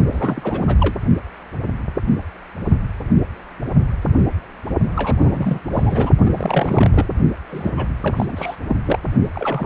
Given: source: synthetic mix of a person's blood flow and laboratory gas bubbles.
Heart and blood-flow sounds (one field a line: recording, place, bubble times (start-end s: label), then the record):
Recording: Doppler ultrasound of blood flow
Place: precordium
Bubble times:
0.11-0.76 s: bubbles
0.80-0.95 s: bubbles
4.96-5.16 s: bubbles
5.21-5.59 s: bubbles
5.73-6.10 s: bubbles
6.25-7.06 s: bubbles
7.49-7.72 s: bubbles
7.76-7.88 s: bubbles
8.03-8.26 s: bubbles
8.29-8.56 s: bubbles
8.68-8.76 s: bubbles
8.85-8.99 s: bubbles
9.35-9.66 s: bubbles
From the record:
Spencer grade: 3 (all of the cardiac periods contain showers or single bubble signals, but not dominating or overriding the cardiac motion signals)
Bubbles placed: only in the low amplitude regions of the cardiac cycle